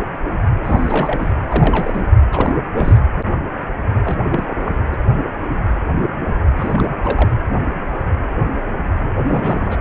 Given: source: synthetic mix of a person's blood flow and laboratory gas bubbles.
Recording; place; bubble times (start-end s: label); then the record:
Doppler ultrasound of blood flow; precordium
0.63-1.33 s: bubbles
1.50-2.06 s: bubbles
2.32-2.56 s: bubbles
2.75-2.98 s: bubbles
4.05-4.17 s: bubbles
4.21-4.73 s: bubbles
4.93-4.97 s: bubbles
6.56-6.99 s: bubbles
7.03-7.31 s: bubbles
9.16-9.76 s: bubbles
From the record:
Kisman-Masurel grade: 332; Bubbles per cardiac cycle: rolling drumbeat, 9 or more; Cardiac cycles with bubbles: 50 to 99%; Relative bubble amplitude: moderate (0.250 to 0.450); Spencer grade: 3 (all of the cardiac periods contain showers or single bubble signals, but not dominating or overriding the cardiac motion signals); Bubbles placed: anywhere in the cardiac cycle